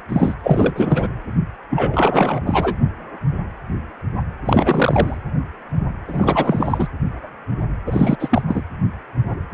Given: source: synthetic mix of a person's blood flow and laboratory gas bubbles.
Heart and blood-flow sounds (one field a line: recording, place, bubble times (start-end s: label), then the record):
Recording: Doppler ultrasound of blood flow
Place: precordium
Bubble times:
0.09-0.34 s: bubbles
0.43-1.07 s: bubbles
1.70-2.41 s: bubbles
2.46-2.75 s: bubbles
4.45-5.17 s: bubbles
6.08-6.88 s: bubbles
7.87-8.16 s: bubbles
8.19-8.42 s: bubbles
8.48-8.63 s: bubbles
From the record:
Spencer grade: 3 (all of the cardiac periods contain showers or single bubble signals, but not dominating or overriding the cardiac motion signals)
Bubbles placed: anywhere in the cardiac cycle